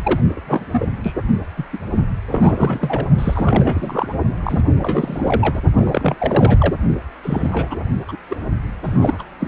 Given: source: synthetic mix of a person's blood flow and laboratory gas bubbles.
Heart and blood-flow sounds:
Doppler ultrasound of blood flow; precordium
0.03-0.20 s: bubbles
0.35-0.41 s: bubbles
0.46-0.88 s: bubbles
1.02-1.13 s: bubbles
1.56-1.66 s: bubbles
1.73-1.78 s: bubbles
2.30-3.05 s: bubbles
3.18-4.08 s: bubbles
4.43-4.62 s: bubbles
4.78-5.61 s: bubbles
5.75-6.15 s: bubbles
6.18-6.76 s: bubbles
7.23-7.76 s: bubbles
8.08-8.17 s: bubbles
8.29-8.36 s: bubbles
8.84-9.22 s: bubbles
9.39-9.48 s: bubbles
From the record:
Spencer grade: 3 (all of the cardiac periods contain showers or single bubble signals, but not dominating or overriding the cardiac motion signals); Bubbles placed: only in the low amplitude regions of the cardiac cycle

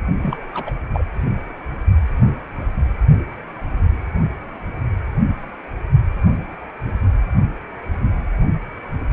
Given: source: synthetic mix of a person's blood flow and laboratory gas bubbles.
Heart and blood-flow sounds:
Doppler ultrasound of blood flow; precordium
0.19-0.37 s: bubbles
0.54-0.72 s: bubbles
0.93-1.05 s: bubbles
From the record:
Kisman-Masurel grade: 211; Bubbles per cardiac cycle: several, 3 to 8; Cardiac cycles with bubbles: 1 to 10%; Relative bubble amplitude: barely perceptible (0.100 to 0.250); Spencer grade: 1 (occasional bubble signal discernible with the cardiac motion signal, with majority of cardiac periods free of bubbles); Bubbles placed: anywhere in the cardiac cycle

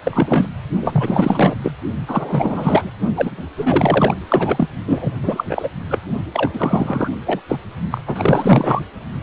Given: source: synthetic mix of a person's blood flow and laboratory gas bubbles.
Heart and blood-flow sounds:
Doppler ultrasound of blood flow; precordium
0.05-0.46 s: bubbles
0.81-1.55 s: bubbles
1.63-1.73 s: bubbles
2.07-2.92 s: bubbles
3.16-3.44 s: bubbles
3.57-4.15 s: bubbles
4.28-4.69 s: bubbles
4.87-5.13 s: bubbles
5.22-5.45 s: bubbles
5.49-5.70 s: bubbles
5.89-5.99 s: bubbles
6.33-6.50 s: bubbles
6.53-7.09 s: bubbles
7.25-7.42 s: bubbles
7.49-7.59 s: bubbles
7.91-8.01 s: bubbles
8.06-8.81 s: bubbles
From the record:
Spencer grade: 4 (maximum detectable bubble signal sounding continuously throughout systole and diastole of every cardiac period, and overriding the amplitude of the normal cardiac signals); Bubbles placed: only in the low amplitude regions of the cardiac cycle

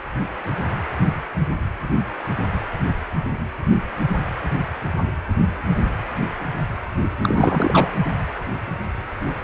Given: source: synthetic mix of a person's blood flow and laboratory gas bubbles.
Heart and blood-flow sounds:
Doppler ultrasound of blood flow; precordium
7.22-7.98 s: bubbles
From the record:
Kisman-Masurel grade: 223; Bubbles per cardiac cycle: several, 3 to 8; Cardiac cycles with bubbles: 10 to 50%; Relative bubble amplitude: loud (0.450 to 0.775); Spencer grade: 2 (many but less than half of the cardiac periods contain bubble signals, singularly or in groups); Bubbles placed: anywhere in the cardiac cycle

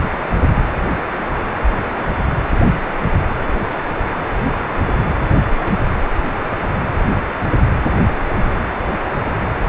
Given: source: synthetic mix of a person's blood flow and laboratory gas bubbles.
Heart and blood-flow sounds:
Doppler ultrasound of blood flow; precordium
5.29-5.51 s: bubbles
5.60-5.76 s: bubbles
9.60-9.69 s: bubbles
From the record:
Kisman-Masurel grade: 221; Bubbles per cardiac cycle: several, 3 to 8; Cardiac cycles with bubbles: 10 to 50%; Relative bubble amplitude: barely perceptible (0.100 to 0.250); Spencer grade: 2 (many but less than half of the cardiac periods contain bubble signals, singularly or in groups); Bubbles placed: anywhere in the cardiac cycle

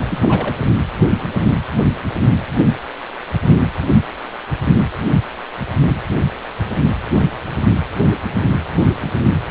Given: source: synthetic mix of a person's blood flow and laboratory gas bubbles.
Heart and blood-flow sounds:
Doppler ultrasound of blood flow; precordium
0.08-0.56 s: bubbles
0.59-0.67 s: bubbles
From the record:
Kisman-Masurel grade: 221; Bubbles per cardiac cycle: several, 3 to 8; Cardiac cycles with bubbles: 10 to 50%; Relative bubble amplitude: barely perceptible (0.100 to 0.250); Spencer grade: 2 (many but less than half of the cardiac periods contain bubble signals, singularly or in groups); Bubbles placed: anywhere in the cardiac cycle

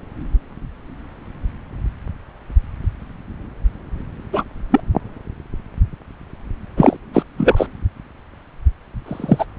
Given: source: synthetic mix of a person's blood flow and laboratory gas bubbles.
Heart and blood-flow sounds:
Doppler ultrasound of blood flow; subclavian vein
4.32-4.43 s: bubbles
4.71-4.80 s: bubbles
6.76-6.97 s: bubbles
7.13-7.22 s: bubbles
7.37-7.67 s: bubbles
9.06-9.45 s: bubbles
From the record:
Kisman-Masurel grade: 223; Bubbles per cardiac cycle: several, 3 to 8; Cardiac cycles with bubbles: 10 to 50%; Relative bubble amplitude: loud (0.450 to 0.775); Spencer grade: 2 (many but less than half of the cardiac periods contain bubble signals, singularly or in groups); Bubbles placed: anywhere in the cardiac cycle

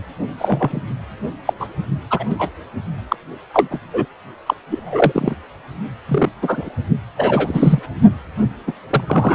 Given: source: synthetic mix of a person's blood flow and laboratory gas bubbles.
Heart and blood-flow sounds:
Doppler ultrasound of blood flow; precordium
0.38-0.81 s: bubbles
1.45-1.53 s: bubbles
1.59-1.68 s: bubbles
2.10-2.26 s: bubbles
2.30-2.35 s: bubbles
2.39-2.51 s: bubbles
3.08-3.16 s: bubbles
3.54-3.80 s: bubbles
3.93-4.05 s: bubbles
4.46-4.54 s: bubbles
4.71-5.35 s: bubbles
6.08-6.29 s: bubbles
6.42-6.71 s: bubbles
7.17-7.79 s: bubbles
8.67-8.72 s: bubbles
8.90-9.04 s: bubbles
9.06-9.35 s: bubbles
From the record:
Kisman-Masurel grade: 243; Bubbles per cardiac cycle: several, 3 to 8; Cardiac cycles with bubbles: 100%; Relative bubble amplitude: loud (0.450 to 0.775); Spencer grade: 3 (all of the cardiac periods contain showers or single bubble signals, but not dominating or overriding the cardiac motion signals); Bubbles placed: only in the low amplitude regions of the cardiac cycle

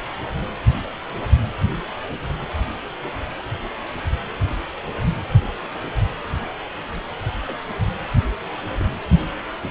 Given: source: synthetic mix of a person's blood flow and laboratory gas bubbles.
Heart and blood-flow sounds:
Doppler ultrasound of blood flow; precordium
7.45-7.58 s: bubbles
8.69-8.98 s: bubbles
9.62-9.70 s: bubbles
From the record:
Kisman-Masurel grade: 121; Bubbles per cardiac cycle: 1 to 2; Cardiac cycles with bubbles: 10 to 50%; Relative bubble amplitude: barely perceptible (0.100 to 0.250); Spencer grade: 2 (many but less than half of the cardiac periods contain bubble signals, singularly or in groups); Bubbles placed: anywhere in the cardiac cycle

